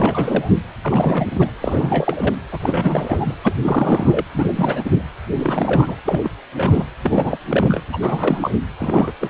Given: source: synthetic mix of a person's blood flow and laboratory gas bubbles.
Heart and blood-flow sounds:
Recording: Doppler ultrasound of blood flow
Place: precordium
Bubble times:
0.00-0.55 s: bubbles
0.83-1.50 s: bubbles
1.60-2.34 s: bubbles
2.51-3.34 s: bubbles
3.44-3.54 s: bubbles
3.62-4.25 s: bubbles
4.34-5.03 s: bubbles
5.33-5.96 s: bubbles
6.05-6.21 s: bubbles
6.23-6.30 s: bubbles
6.56-6.86 s: bubbles
7.04-7.38 s: bubbles
7.50-7.81 s: bubbles
7.93-8.55 s: bubbles
8.79-9.12 s: bubbles
9.21-9.29 s: bubbles
From the record:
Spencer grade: 3 (all of the cardiac periods contain showers or single bubble signals, but not dominating or overriding the cardiac motion signals)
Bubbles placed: anywhere in the cardiac cycle

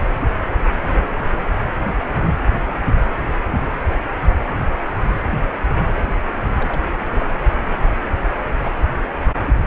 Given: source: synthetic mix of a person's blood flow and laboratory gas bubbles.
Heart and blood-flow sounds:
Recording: Doppler ultrasound of blood flow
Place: precordium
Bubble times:
6.52-6.83 s: bubbles
6.94-7.28 s: bubbles
7.59-7.71 s: bubbles
From the record:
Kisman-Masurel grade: 211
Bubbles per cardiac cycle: several, 3 to 8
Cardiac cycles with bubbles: 1 to 10%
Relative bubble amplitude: barely perceptible (0.100 to 0.250)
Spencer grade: 1 (occasional bubble signal discernible with the cardiac motion signal, with majority of cardiac periods free of bubbles)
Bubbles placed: anywhere in the cardiac cycle

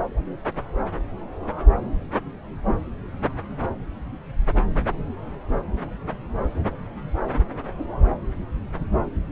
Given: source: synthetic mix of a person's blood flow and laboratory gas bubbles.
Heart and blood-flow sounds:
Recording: Doppler ultrasound of blood flow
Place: subclavian vein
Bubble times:
no bubbles
From the record:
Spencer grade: 0 (complete lack of bubble signals)

